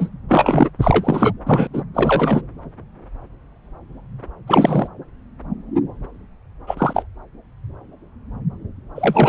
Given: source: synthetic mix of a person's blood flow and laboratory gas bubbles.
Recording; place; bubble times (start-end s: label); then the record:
Doppler ultrasound of blood flow; subclavian vein
0.00-0.09 s: bubbles
0.28-0.70 s: bubbles
0.81-1.32 s: bubbles
1.45-1.67 s: bubbles
1.73-1.82 s: bubbles
1.94-2.41 s: bubbles
4.47-4.88 s: bubbles
6.67-6.75 s: bubbles
6.77-7.03 s: bubbles
8.96-9.29 s: bubbles
From the record:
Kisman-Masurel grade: 223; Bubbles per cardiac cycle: several, 3 to 8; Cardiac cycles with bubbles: 10 to 50%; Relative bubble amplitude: loud (0.450 to 0.775); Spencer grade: 2 (many but less than half of the cardiac periods contain bubble signals, singularly or in groups); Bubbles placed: anywhere in the cardiac cycle